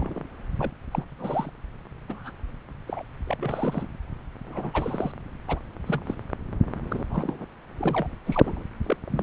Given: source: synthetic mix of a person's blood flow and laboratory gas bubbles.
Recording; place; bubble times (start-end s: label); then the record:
Doppler ultrasound of blood flow; subclavian vein
0.00-0.24 s: bubbles
0.58-0.71 s: bubbles
0.91-1.04 s: bubbles
1.18-1.50 s: bubbles
2.08-2.31 s: bubbles
2.88-3.02 s: bubbles
3.27-3.87 s: bubbles
4.46-5.12 s: bubbles
5.48-5.60 s: bubbles
5.86-6.02 s: bubbles
6.05-6.15 s: bubbles
6.90-7.04 s: bubbles
7.09-7.46 s: bubbles
7.78-8.07 s: bubbles
8.26-8.64 s: bubbles
8.83-8.97 s: bubbles
9.10-9.23 s: bubbles
From the record:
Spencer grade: 3 (all of the cardiac periods contain showers or single bubble signals, but not dominating or overriding the cardiac motion signals); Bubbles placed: anywhere in the cardiac cycle